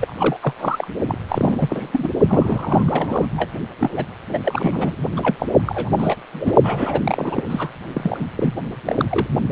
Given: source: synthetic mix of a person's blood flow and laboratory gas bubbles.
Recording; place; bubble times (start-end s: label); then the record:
Doppler ultrasound of blood flow; precordium
0.00-0.14 s: bubbles
0.18-0.37 s: bubbles
0.41-0.53 s: bubbles
0.59-0.88 s: bubbles
1.08-1.18 s: bubbles
1.28-2.08 s: bubbles
2.29-3.27 s: bubbles
3.35-3.52 s: bubbles
3.79-3.90 s: bubbles
3.96-4.06 s: bubbles
4.29-4.39 s: bubbles
4.45-4.96 s: bubbles
5.17-5.35 s: bubbles
5.39-5.47 s: bubbles
5.66-5.91 s: bubbles
5.96-6.15 s: bubbles
6.33-6.53 s: bubbles
6.63-7.43 s: bubbles
7.50-7.70 s: bubbles
7.93-8.26 s: bubbles
8.37-8.54 s: bubbles
8.85-9.05 s: bubbles
9.10-9.28 s: bubbles
From the record:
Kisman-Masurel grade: 342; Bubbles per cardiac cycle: rolling drumbeat, 9 or more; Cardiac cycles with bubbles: 100%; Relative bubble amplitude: moderate (0.250 to 0.450); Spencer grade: 3 (all of the cardiac periods contain showers or single bubble signals, but not dominating or overriding the cardiac motion signals); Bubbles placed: only in the low amplitude regions of the cardiac cycle